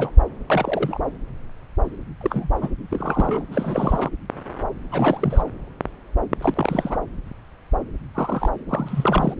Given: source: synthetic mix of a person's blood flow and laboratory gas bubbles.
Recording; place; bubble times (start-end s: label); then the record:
Doppler ultrasound of blood flow; subclavian vein
0.00-0.11 s: bubbles
0.50-1.01 s: bubbles
2.21-2.49 s: bubbles
2.61-2.69 s: bubbles
2.90-3.42 s: bubbles
3.51-4.09 s: bubbles
4.91-5.43 s: bubbles
6.41-6.97 s: bubbles
8.14-8.49 s: bubbles
8.69-9.34 s: bubbles
From the record:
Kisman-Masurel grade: 232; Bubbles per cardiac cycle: several, 3 to 8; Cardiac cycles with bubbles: 50 to 99%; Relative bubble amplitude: moderate (0.250 to 0.450); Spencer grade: 3 (all of the cardiac periods contain showers or single bubble signals, but not dominating or overriding the cardiac motion signals); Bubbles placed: anywhere in the cardiac cycle